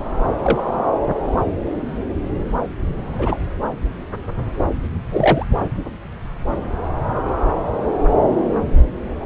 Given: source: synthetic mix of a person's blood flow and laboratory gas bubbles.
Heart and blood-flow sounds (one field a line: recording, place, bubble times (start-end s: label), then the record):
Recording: Doppler ultrasound of blood flow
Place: subclavian vein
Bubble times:
0.42-0.63 s: bubbles
3.19-3.38 s: bubbles
5.11-5.46 s: bubbles
From the record:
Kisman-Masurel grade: 122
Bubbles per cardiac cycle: 1 to 2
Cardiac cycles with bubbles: 10 to 50%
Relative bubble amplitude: moderate (0.250 to 0.450)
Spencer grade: 2 (many but less than half of the cardiac periods contain bubble signals, singularly or in groups)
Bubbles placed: anywhere in the cardiac cycle